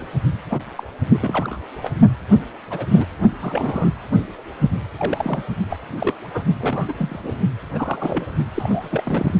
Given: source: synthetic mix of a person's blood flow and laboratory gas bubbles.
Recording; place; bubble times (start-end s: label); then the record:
Doppler ultrasound of blood flow; precordium
0.00-0.06 s: bubbles
0.49-0.64 s: bubbles
0.75-0.83 s: bubbles
1.13-1.59 s: bubbles
1.80-1.91 s: bubbles
2.70-2.85 s: bubbles
2.90-3.06 s: bubbles
3.41-3.91 s: bubbles
4.61-4.66 s: bubbles
4.96-5.44 s: bubbles
5.70-5.77 s: bubbles
5.99-6.14 s: bubbles
6.34-6.42 s: bubbles
6.54-6.94 s: bubbles
6.99-7.34 s: bubbles
7.75-8.26 s: bubbles
8.54-9.34 s: bubbles
From the record:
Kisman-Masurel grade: 242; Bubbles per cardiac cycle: several, 3 to 8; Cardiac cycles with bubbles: 100%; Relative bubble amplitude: moderate (0.250 to 0.450); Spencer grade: 3 (all of the cardiac periods contain showers or single bubble signals, but not dominating or overriding the cardiac motion signals); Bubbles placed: only in the low amplitude regions of the cardiac cycle